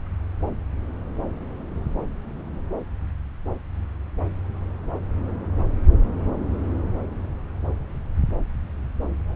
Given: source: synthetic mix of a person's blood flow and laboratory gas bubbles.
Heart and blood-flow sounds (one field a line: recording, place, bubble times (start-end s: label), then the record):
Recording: Doppler ultrasound of blood flow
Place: subclavian vein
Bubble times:
no bubbles
From the record:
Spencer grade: 0 (complete lack of bubble signals)